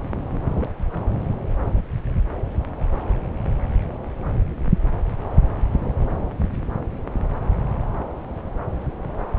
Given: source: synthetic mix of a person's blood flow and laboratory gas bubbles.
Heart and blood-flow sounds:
Doppler ultrasound of blood flow; subclavian vein
0.53-0.69 s: bubbles
From the record:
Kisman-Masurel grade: 111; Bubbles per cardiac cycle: 1 to 2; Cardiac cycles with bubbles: 1 to 10%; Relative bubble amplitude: barely perceptible (0.100 to 0.250); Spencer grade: 1 (occasional bubble signal discernible with the cardiac motion signal, with majority of cardiac periods free of bubbles); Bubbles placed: anywhere in the cardiac cycle

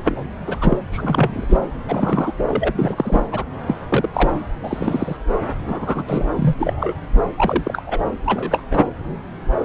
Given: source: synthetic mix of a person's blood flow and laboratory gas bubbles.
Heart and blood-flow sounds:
Doppler ultrasound of blood flow; subclavian vein
0.04-0.29 s: bubbles
0.47-0.56 s: bubbles
0.61-0.77 s: bubbles
0.92-1.45 s: bubbles
1.48-1.68 s: bubbles
1.88-2.32 s: bubbles
2.38-2.44 s: bubbles
2.48-2.73 s: bubbles
2.78-3.26 s: bubbles
3.31-3.44 s: bubbles
3.67-3.77 s: bubbles
3.89-4.08 s: bubbles
4.13-4.30 s: bubbles
4.63-5.17 s: bubbles
5.67-6.04 s: bubbles
6.06-6.26 s: bubbles
6.36-6.54 s: bubbles
6.58-6.93 s: bubbles
7.36-7.82 s: bubbles
7.87-7.99 s: bubbles
8.26-8.63 s: bubbles
8.71-8.83 s: bubbles
From the record:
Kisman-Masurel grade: 243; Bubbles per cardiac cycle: several, 3 to 8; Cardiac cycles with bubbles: 100%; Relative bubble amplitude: loud (0.450 to 0.775); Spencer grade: 3 (all of the cardiac periods contain showers or single bubble signals, but not dominating or overriding the cardiac motion signals); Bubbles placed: anywhere in the cardiac cycle

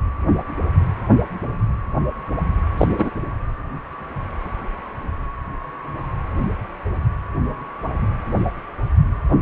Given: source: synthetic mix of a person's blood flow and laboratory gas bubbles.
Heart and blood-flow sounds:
Doppler ultrasound of blood flow; precordium
2.77-3.10 s: bubbles
From the record:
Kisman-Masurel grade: 113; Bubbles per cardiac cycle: 1 to 2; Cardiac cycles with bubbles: 1 to 10%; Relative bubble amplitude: loud (0.450 to 0.775); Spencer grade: 1 (occasional bubble signal discernible with the cardiac motion signal, with majority of cardiac periods free of bubbles); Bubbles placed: anywhere in the cardiac cycle

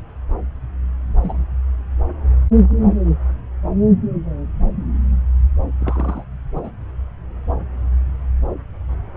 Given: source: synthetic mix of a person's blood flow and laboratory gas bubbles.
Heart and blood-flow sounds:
Doppler ultrasound of blood flow; subclavian vein
1.22-1.44 s: bubbles
5.79-6.24 s: bubbles
6.56-6.71 s: bubbles
From the record:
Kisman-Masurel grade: 121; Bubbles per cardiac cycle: 1 to 2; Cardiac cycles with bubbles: 10 to 50%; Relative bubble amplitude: barely perceptible (0.100 to 0.250); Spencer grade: 2 (many but less than half of the cardiac periods contain bubble signals, singularly or in groups); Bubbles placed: anywhere in the cardiac cycle

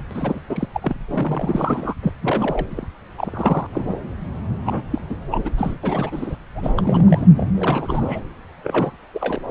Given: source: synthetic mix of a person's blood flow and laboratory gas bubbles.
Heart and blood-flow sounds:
Doppler ultrasound of blood flow; subclavian vein
0.10-0.41 s: bubbles
0.49-0.66 s: bubbles
0.73-0.97 s: bubbles
1.09-1.94 s: bubbles
2.03-2.12 s: bubbles
2.22-2.66 s: bubbles
2.70-2.85 s: bubbles
3.17-3.67 s: bubbles
3.72-3.99 s: bubbles
4.65-4.81 s: bubbles
4.90-5.01 s: bubbles
5.09-5.15 s: bubbles
5.31-5.50 s: bubbles
5.57-5.78 s: bubbles
5.83-6.36 s: bubbles
6.55-7.26 s: bubbles
7.37-7.46 s: bubbles
7.54-8.20 s: bubbles
8.63-8.96 s: bubbles
9.14-9.42 s: bubbles
From the record:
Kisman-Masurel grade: 342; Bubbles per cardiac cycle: rolling drumbeat, 9 or more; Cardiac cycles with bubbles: 100%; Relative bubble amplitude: moderate (0.250 to 0.450); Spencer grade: 3 (all of the cardiac periods contain showers or single bubble signals, but not dominating or overriding the cardiac motion signals); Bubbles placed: anywhere in the cardiac cycle

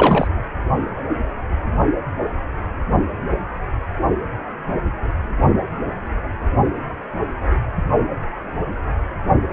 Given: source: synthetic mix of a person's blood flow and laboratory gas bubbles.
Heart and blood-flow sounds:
Doppler ultrasound of blood flow; precordium
0.00-0.28 s: bubbles
From the record:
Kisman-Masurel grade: 213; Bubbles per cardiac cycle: several, 3 to 8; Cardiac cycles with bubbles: 1 to 10%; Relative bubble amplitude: loud (0.450 to 0.775); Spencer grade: 1 (occasional bubble signal discernible with the cardiac motion signal, with majority of cardiac periods free of bubbles); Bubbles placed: only in the low amplitude regions of the cardiac cycle

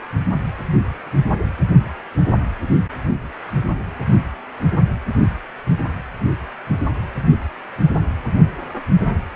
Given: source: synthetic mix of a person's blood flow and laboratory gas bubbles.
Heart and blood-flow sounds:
Doppler ultrasound of blood flow; precordium
no bubbles
From the record:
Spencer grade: 0 (complete lack of bubble signals)

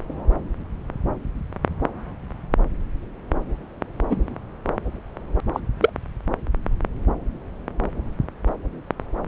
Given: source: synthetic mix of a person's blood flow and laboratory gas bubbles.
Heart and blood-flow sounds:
Doppler ultrasound of blood flow; subclavian vein
4.09-4.29 s: bubbles
5.54-5.60 s: bubbles
5.81-5.90 s: bubbles
From the record:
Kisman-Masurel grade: 122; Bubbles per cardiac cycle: 1 to 2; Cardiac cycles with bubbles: 10 to 50%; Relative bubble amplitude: moderate (0.250 to 0.450); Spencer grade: 2 (many but less than half of the cardiac periods contain bubble signals, singularly or in groups); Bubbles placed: anywhere in the cardiac cycle

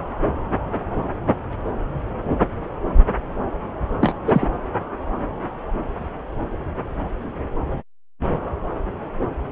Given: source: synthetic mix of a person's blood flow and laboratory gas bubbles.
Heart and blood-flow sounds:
Doppler ultrasound of blood flow; subclavian vein
4.01-4.14 s: bubbles
4.27-4.48 s: bubbles
From the record:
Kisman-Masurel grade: 212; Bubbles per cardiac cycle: several, 3 to 8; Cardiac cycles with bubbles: 1 to 10%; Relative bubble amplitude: moderate (0.250 to 0.450); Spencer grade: 1 (occasional bubble signal discernible with the cardiac motion signal, with majority of cardiac periods free of bubbles); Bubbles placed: anywhere in the cardiac cycle

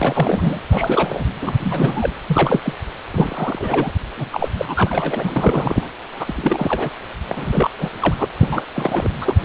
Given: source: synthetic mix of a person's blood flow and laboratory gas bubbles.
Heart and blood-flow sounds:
Doppler ultrasound of blood flow; precordium
0.00-0.60 s: bubbles
0.71-1.25 s: bubbles
1.42-1.53 s: bubbles
1.60-2.14 s: bubbles
2.27-2.73 s: bubbles
3.12-3.93 s: bubbles
4.17-4.29 s: bubbles
4.31-4.48 s: bubbles
4.57-5.31 s: bubbles
5.35-5.86 s: bubbles
6.18-6.90 s: bubbles
7.28-7.70 s: bubbles
7.78-7.90 s: bubbles
8.00-8.16 s: bubbles
8.18-8.27 s: bubbles
8.38-8.63 s: bubbles
8.74-9.09 s: bubbles
9.21-9.35 s: bubbles
From the record:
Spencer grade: 3 (all of the cardiac periods contain showers or single bubble signals, but not dominating or overriding the cardiac motion signals); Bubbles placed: anywhere in the cardiac cycle

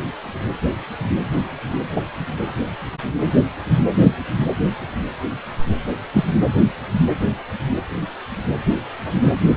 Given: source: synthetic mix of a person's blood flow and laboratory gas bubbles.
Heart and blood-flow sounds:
Doppler ultrasound of blood flow; precordium
1.91-2.06 s: bubbles
6.14-6.24 s: bubbles
9.13-9.34 s: bubbles
From the record:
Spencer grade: 2 (many but less than half of the cardiac periods contain bubble signals, singularly or in groups); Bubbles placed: anywhere in the cardiac cycle

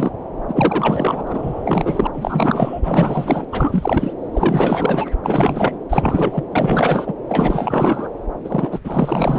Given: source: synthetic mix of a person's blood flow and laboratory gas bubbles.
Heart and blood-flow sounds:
Doppler ultrasound of blood flow; subclavian vein
0.00-0.10 s: bubbles
0.48-2.07 s: bubbles
2.13-2.81 s: bubbles
2.83-3.45 s: bubbles
3.52-4.13 s: bubbles
4.33-5.08 s: bubbles
5.23-5.79 s: bubbles
5.89-6.44 s: bubbles
6.52-7.14 s: bubbles
7.29-8.09 s: bubbles
8.44-8.79 s: bubbles
8.84-9.39 s: bubbles
From the record:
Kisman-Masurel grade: 444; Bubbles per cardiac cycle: continuous sound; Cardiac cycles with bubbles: 100%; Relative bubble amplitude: maximal (0.775 to 0.999); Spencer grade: 4 (maximum detectable bubble signal sounding continuously throughout systole and diastole of every cardiac period, and overriding the amplitude of the normal cardiac signals); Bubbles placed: anywhere in the cardiac cycle

